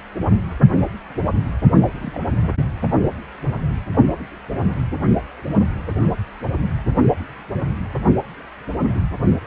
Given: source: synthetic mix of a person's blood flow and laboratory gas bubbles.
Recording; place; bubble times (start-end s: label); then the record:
Doppler ultrasound of blood flow; precordium
2.01-2.19 s: bubbles
From the record:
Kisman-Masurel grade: 111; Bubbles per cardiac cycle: 1 to 2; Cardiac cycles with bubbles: 1 to 10%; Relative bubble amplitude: barely perceptible (0.100 to 0.250); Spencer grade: 1 (occasional bubble signal discernible with the cardiac motion signal, with majority of cardiac periods free of bubbles); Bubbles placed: only in the low amplitude regions of the cardiac cycle